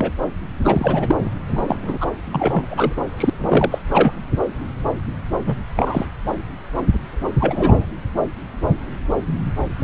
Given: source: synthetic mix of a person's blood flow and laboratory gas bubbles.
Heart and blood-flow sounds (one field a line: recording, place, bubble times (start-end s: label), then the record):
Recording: Doppler ultrasound of blood flow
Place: subclavian vein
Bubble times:
0.00-0.11 s: bubbles
0.61-1.17 s: bubbles
1.20-1.29 s: bubbles
1.47-2.09 s: bubbles
2.31-2.93 s: bubbles
2.96-3.01 s: bubbles
3.17-3.30 s: bubbles
3.39-3.79 s: bubbles
3.91-4.12 s: bubbles
5.46-5.57 s: bubbles
5.75-6.05 s: bubbles
7.40-7.86 s: bubbles
From the record:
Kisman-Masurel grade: 232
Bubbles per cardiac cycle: several, 3 to 8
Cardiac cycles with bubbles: 50 to 99%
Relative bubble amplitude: moderate (0.250 to 0.450)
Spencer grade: 3 (all of the cardiac periods contain showers or single bubble signals, but not dominating or overriding the cardiac motion signals)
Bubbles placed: anywhere in the cardiac cycle